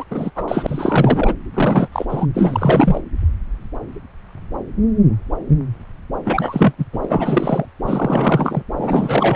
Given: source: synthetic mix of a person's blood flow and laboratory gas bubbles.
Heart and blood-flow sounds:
Doppler ultrasound of blood flow; subclavian vein
0.00-0.04 s: bubbles
0.10-0.31 s: bubbles
0.35-0.45 s: bubbles
0.47-1.33 s: bubbles
1.53-1.88 s: bubbles
1.92-2.05 s: bubbles
2.08-2.26 s: bubbles
2.33-3.01 s: bubbles
6.25-6.73 s: bubbles
6.78-6.86 s: bubbles
6.92-7.66 s: bubbles
7.85-8.62 s: bubbles
8.76-9.36 s: bubbles
From the record:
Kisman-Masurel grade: 333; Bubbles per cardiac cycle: rolling drumbeat, 9 or more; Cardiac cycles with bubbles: 50 to 99%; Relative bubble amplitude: loud (0.450 to 0.775); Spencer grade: 3 (all of the cardiac periods contain showers or single bubble signals, but not dominating or overriding the cardiac motion signals); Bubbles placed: anywhere in the cardiac cycle

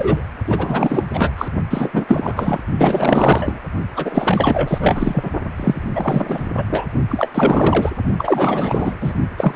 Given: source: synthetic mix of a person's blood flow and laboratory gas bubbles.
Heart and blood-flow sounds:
Doppler ultrasound of blood flow; precordium
0.00-0.22 s: bubbles
0.47-1.03 s: bubbles
1.13-1.31 s: bubbles
1.38-1.48 s: bubbles
1.70-2.05 s: bubbles
2.08-2.60 s: bubbles
2.77-3.60 s: bubbles
3.96-5.30 s: bubbles
5.57-6.49 s: bubbles
6.57-6.64 s: bubbles
6.71-6.87 s: bubbles
7.09-7.29 s: bubbles
7.34-7.90 s: bubbles
8.18-8.95 s: bubbles
9.01-9.13 s: bubbles
9.37-9.56 s: bubbles
From the record:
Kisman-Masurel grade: 444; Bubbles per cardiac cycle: continuous sound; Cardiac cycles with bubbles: 100%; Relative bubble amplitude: maximal (0.775 to 0.999); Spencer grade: 4 (maximum detectable bubble signal sounding continuously throughout systole and diastole of every cardiac period, and overriding the amplitude of the normal cardiac signals); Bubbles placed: only in the low amplitude regions of the cardiac cycle

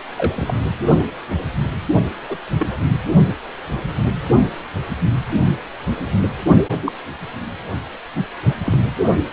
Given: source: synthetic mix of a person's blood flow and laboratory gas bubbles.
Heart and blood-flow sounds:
Doppler ultrasound of blood flow; precordium
0.16-0.53 s: bubbles
2.29-2.38 s: bubbles
2.58-2.83 s: bubbles
6.82-6.92 s: bubbles
8.66-8.78 s: bubbles
From the record:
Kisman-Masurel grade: 122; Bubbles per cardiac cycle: 1 to 2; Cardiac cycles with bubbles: 10 to 50%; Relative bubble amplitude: moderate (0.250 to 0.450); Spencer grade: 2 (many but less than half of the cardiac periods contain bubble signals, singularly or in groups); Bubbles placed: only in the low amplitude regions of the cardiac cycle

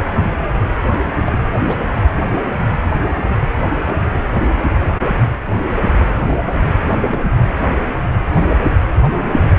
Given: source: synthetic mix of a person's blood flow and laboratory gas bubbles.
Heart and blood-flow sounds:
Doppler ultrasound of blood flow; precordium
0.90-1.07 s: bubbles
1.26-1.39 s: bubbles
1.67-2.08 s: bubbles
3.85-4.24 s: bubbles
5.98-6.14 s: bubbles
6.27-6.37 s: bubbles
7.09-7.26 s: bubbles
8.34-8.51 s: bubbles
From the record:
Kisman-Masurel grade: 121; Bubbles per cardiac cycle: 1 to 2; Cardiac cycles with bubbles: 10 to 50%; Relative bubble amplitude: barely perceptible (0.100 to 0.250); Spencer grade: 2 (many but less than half of the cardiac periods contain bubble signals, singularly or in groups); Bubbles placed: anywhere in the cardiac cycle

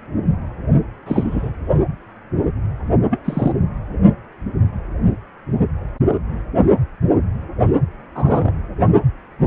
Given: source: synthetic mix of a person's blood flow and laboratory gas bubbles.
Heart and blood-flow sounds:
Doppler ultrasound of blood flow; precordium
1.06-1.52 s: bubbles
3.10-3.20 s: bubbles
3.25-3.52 s: bubbles
6.57-6.65 s: bubbles
8.14-8.53 s: bubbles
From the record:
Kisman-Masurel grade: 122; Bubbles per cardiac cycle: 1 to 2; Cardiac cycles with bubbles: 10 to 50%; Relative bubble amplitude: moderate (0.250 to 0.450); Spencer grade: 2 (many but less than half of the cardiac periods contain bubble signals, singularly or in groups); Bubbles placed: anywhere in the cardiac cycle

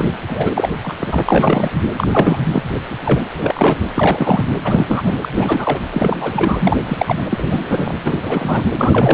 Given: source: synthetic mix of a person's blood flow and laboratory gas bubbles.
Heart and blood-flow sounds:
Doppler ultrasound of blood flow; precordium
0.00-0.04 s: bubbles
0.29-0.69 s: bubbles
0.84-0.93 s: bubbles
0.99-1.23 s: bubbles
1.25-1.71 s: bubbles
1.96-2.07 s: bubbles
2.12-2.38 s: bubbles
2.52-2.63 s: bubbles
3.04-3.28 s: bubbles
3.39-3.76 s: bubbles
3.96-4.43 s: bubbles
4.64-5.17 s: bubbles
5.22-5.29 s: bubbles
5.32-5.79 s: bubbles
5.92-6.76 s: bubbles
6.85-7.24 s: bubbles
7.30-7.92 s: bubbles
8.04-8.68 s: bubbles
8.78-9.14 s: bubbles
From the record:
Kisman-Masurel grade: 342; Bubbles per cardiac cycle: rolling drumbeat, 9 or more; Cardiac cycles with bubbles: 100%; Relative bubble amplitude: moderate (0.250 to 0.450); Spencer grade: 3 (all of the cardiac periods contain showers or single bubble signals, but not dominating or overriding the cardiac motion signals); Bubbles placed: anywhere in the cardiac cycle

